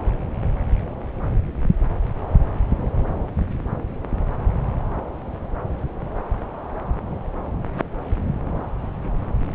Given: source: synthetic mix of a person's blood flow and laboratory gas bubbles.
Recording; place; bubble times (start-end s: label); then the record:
Doppler ultrasound of blood flow; subclavian vein
no bubbles
From the record:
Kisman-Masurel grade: 000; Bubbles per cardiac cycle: 0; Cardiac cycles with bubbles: 0%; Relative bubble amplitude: no bubbles discernible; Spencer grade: 0 (complete lack of bubble signals)